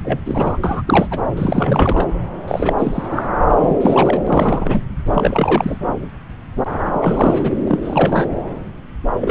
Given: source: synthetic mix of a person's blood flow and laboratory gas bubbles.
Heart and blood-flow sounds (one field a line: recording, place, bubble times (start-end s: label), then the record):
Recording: Doppler ultrasound of blood flow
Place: subclavian vein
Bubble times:
0.04-0.19 s: bubbles
0.26-0.57 s: bubbles
0.63-0.82 s: bubbles
0.87-1.08 s: bubbles
1.10-1.20 s: bubbles
1.36-2.07 s: bubbles
2.48-2.73 s: bubbles
2.78-3.23 s: bubbles
3.62-4.22 s: bubbles
4.26-4.81 s: bubbles
5.14-5.75 s: bubbles
6.92-7.51 s: bubbles
7.65-7.79 s: bubbles
7.82-8.26 s: bubbles
9.20-9.31 s: bubbles
From the record:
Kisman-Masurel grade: 332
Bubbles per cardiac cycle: rolling drumbeat, 9 or more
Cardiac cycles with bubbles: 50 to 99%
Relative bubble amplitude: moderate (0.250 to 0.450)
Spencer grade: 3 (all of the cardiac periods contain showers or single bubble signals, but not dominating or overriding the cardiac motion signals)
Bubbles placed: anywhere in the cardiac cycle